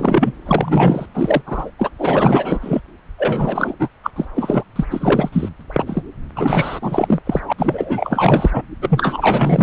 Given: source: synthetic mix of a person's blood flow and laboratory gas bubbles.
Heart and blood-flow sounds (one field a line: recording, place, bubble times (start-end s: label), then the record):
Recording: Doppler ultrasound of blood flow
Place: subclavian vein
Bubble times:
0.00-0.32 s: bubbles
0.45-1.06 s: bubbles
1.14-1.41 s: bubbles
1.46-1.71 s: bubbles
1.79-1.90 s: bubbles
1.99-2.81 s: bubbles
3.18-3.76 s: bubbles
3.79-3.89 s: bubbles
4.03-4.10 s: bubbles
4.16-4.25 s: bubbles
4.35-4.63 s: bubbles
4.75-4.85 s: bubbles
4.90-5.29 s: bubbles
5.32-5.49 s: bubbles
5.72-5.84 s: bubbles
5.86-6.02 s: bubbles
6.35-6.79 s: bubbles
6.82-7.21 s: bubbles
7.25-7.41 s: bubbles
7.47-7.53 s: bubbles
7.58-8.51 s: bubbles
8.53-8.62 s: bubbles
8.82-9.63 s: bubbles
From the record:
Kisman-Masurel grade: 444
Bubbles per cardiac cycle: continuous sound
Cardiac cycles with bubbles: 100%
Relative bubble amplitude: maximal (0.775 to 0.999)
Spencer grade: 4 (maximum detectable bubble signal sounding continuously throughout systole and diastole of every cardiac period, and overriding the amplitude of the normal cardiac signals)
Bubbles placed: anywhere in the cardiac cycle